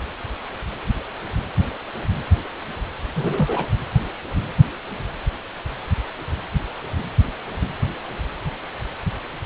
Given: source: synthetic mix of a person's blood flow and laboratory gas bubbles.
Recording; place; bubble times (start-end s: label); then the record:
Doppler ultrasound of blood flow; precordium
3.15-3.67 s: bubbles
From the record:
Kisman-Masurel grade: 212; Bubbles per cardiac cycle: several, 3 to 8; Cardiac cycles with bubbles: 1 to 10%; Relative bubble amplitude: moderate (0.250 to 0.450); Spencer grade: 1 (occasional bubble signal discernible with the cardiac motion signal, with majority of cardiac periods free of bubbles); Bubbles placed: anywhere in the cardiac cycle